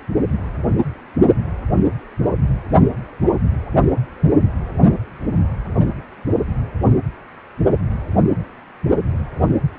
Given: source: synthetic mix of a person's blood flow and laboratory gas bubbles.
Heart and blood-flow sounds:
Doppler ultrasound of blood flow; precordium
no bubbles
From the record:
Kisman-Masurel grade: 000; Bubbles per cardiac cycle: 0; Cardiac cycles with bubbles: 0%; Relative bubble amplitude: no bubbles discernible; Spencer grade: 0 (complete lack of bubble signals)

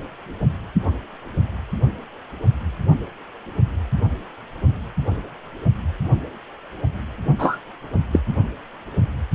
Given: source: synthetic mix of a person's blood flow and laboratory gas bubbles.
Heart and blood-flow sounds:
Doppler ultrasound of blood flow; precordium
7.39-7.58 s: bubbles
8.12-8.19 s: bubbles
From the record:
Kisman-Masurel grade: 113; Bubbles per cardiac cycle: 1 to 2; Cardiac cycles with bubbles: 1 to 10%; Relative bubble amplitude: loud (0.450 to 0.775); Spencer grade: 1 (occasional bubble signal discernible with the cardiac motion signal, with majority of cardiac periods free of bubbles); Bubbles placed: only in the low amplitude regions of the cardiac cycle

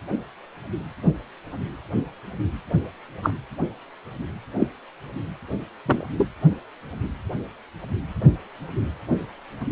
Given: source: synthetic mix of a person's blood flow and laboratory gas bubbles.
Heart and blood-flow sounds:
Doppler ultrasound of blood flow; precordium
3.23-3.31 s: bubbles
4.59-4.67 s: bubbles
5.86-6.05 s: bubbles
6.17-6.27 s: bubbles
From the record:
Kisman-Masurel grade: 122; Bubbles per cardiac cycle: 1 to 2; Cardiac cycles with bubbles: 10 to 50%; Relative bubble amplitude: moderate (0.250 to 0.450); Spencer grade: 2 (many but less than half of the cardiac periods contain bubble signals, singularly or in groups); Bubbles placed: anywhere in the cardiac cycle

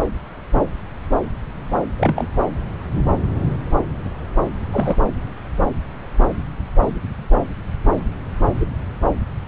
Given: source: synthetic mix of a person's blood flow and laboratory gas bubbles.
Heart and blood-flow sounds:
Doppler ultrasound of blood flow; subclavian vein
1.98-2.28 s: bubbles
4.72-4.96 s: bubbles
8.60-8.66 s: bubbles
From the record:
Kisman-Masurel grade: 122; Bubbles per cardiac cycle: 1 to 2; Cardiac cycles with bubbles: 10 to 50%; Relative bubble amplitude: moderate (0.250 to 0.450); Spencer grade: 2 (many but less than half of the cardiac periods contain bubble signals, singularly or in groups); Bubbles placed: anywhere in the cardiac cycle

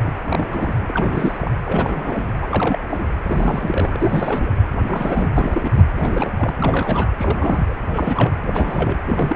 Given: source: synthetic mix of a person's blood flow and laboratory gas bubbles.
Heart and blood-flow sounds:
Doppler ultrasound of blood flow; precordium
0.00-0.13 s: bubbles
0.21-0.76 s: bubbles
0.88-1.51 s: bubbles
1.64-2.33 s: bubbles
2.42-2.79 s: bubbles
2.89-3.07 s: bubbles
3.22-4.50 s: bubbles
4.78-5.28 s: bubbles
5.37-5.85 s: bubbles
5.99-6.31 s: bubbles
6.37-6.54 s: bubbles
6.57-7.13 s: bubbles
7.18-7.75 s: bubbles
7.86-8.31 s: bubbles
8.47-8.96 s: bubbles
9.07-9.36 s: bubbles
From the record:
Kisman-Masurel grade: 342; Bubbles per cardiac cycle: rolling drumbeat, 9 or more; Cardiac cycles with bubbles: 100%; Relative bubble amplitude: moderate (0.250 to 0.450); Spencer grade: 3 (all of the cardiac periods contain showers or single bubble signals, but not dominating or overriding the cardiac motion signals); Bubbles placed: anywhere in the cardiac cycle

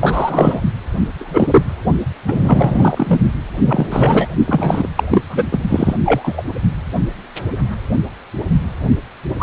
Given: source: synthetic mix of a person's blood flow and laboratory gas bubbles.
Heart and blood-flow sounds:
Doppler ultrasound of blood flow; precordium
0.00-0.61 s: bubbles
1.19-1.63 s: bubbles
2.27-3.20 s: bubbles
3.66-4.29 s: bubbles
4.46-4.88 s: bubbles
4.96-5.04 s: bubbles
5.09-5.22 s: bubbles
5.29-5.47 s: bubbles
5.51-5.59 s: bubbles
5.67-5.96 s: bubbles
6.05-6.42 s: bubbles
9.38-9.43 s: bubbles
From the record:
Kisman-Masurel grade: 233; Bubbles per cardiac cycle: several, 3 to 8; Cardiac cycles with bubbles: 50 to 99%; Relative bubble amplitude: loud (0.450 to 0.775); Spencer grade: 3 (all of the cardiac periods contain showers or single bubble signals, but not dominating or overriding the cardiac motion signals); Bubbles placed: only in the low amplitude regions of the cardiac cycle

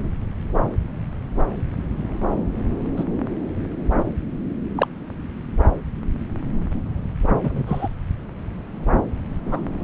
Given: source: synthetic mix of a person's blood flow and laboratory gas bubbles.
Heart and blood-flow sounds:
Doppler ultrasound of blood flow; subclavian vein
2.96-3.04 s: bubbles
4.77-4.88 s: bubbles
7.44-7.63 s: bubbles
7.66-7.88 s: bubbles
9.46-9.60 s: bubbles
From the record:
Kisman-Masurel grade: 123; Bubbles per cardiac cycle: 1 to 2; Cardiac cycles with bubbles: 10 to 50%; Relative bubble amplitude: loud (0.450 to 0.775); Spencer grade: 2 (many but less than half of the cardiac periods contain bubble signals, singularly or in groups); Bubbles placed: anywhere in the cardiac cycle

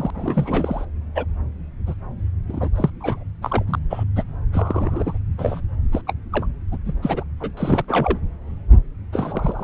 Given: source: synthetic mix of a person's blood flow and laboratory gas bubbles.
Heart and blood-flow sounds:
Doppler ultrasound of blood flow; subclavian vein
0.00-0.85 s: bubbles
1.15-1.25 s: bubbles
1.86-1.94 s: bubbles
2.49-2.70 s: bubbles
2.76-2.90 s: bubbles
3.01-3.23 s: bubbles
3.42-3.63 s: bubbles
3.68-3.79 s: bubbles
3.90-4.04 s: bubbles
4.16-4.23 s: bubbles
4.53-5.17 s: bubbles
5.38-5.61 s: bubbles
5.92-6.02 s: bubbles
6.07-6.13 s: bubbles
6.32-6.46 s: bubbles
6.71-6.77 s: bubbles
6.86-6.94 s: bubbles
7.02-7.24 s: bubbles
7.40-7.50 s: bubbles
7.57-7.84 s: bubbles
7.88-8.18 s: bubbles
9.12-9.64 s: bubbles
From the record:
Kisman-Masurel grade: 232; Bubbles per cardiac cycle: several, 3 to 8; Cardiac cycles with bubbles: 50 to 99%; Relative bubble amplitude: moderate (0.250 to 0.450); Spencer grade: 3 (all of the cardiac periods contain showers or single bubble signals, but not dominating or overriding the cardiac motion signals); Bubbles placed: anywhere in the cardiac cycle

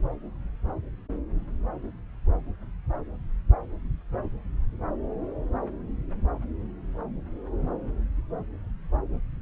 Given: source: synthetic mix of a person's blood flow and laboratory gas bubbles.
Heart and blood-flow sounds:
Doppler ultrasound of blood flow; subclavian vein
no bubbles
From the record:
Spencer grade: 0 (complete lack of bubble signals)

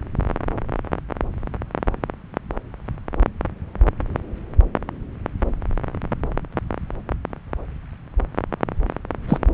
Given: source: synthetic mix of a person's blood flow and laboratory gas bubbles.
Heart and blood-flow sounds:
Doppler ultrasound of blood flow; subclavian vein
9.29-9.38 s: bubbles
From the record:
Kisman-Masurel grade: 113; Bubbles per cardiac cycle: 1 to 2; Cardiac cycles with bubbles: 1 to 10%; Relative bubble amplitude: loud (0.450 to 0.775); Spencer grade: 1 (occasional bubble signal discernible with the cardiac motion signal, with majority of cardiac periods free of bubbles); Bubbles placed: anywhere in the cardiac cycle

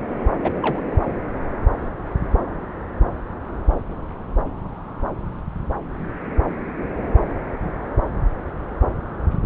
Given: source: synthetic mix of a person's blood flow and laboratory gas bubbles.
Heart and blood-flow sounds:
Doppler ultrasound of blood flow; subclavian vein
0.43-0.56 s: bubbles
0.60-0.81 s: bubbles
From the record:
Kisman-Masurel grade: 111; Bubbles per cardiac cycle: 1 to 2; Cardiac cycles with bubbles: 1 to 10%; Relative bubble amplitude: barely perceptible (0.100 to 0.250); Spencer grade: 1 (occasional bubble signal discernible with the cardiac motion signal, with majority of cardiac periods free of bubbles); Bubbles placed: anywhere in the cardiac cycle

